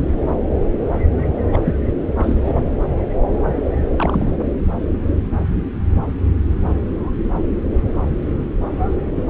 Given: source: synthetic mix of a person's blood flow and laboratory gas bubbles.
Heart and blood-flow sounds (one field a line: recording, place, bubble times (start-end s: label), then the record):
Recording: Doppler ultrasound of blood flow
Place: subclavian vein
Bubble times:
1.52-1.58 s: bubbles
1.64-1.73 s: bubbles
1.87-1.93 s: bubbles
2.17-2.65 s: bubbles
3.97-4.38 s: bubbles
9.15-9.24 s: bubbles
From the record:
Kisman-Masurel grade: 222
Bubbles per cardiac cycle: several, 3 to 8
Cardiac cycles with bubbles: 10 to 50%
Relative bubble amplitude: moderate (0.250 to 0.450)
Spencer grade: 2 (many but less than half of the cardiac periods contain bubble signals, singularly or in groups)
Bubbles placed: anywhere in the cardiac cycle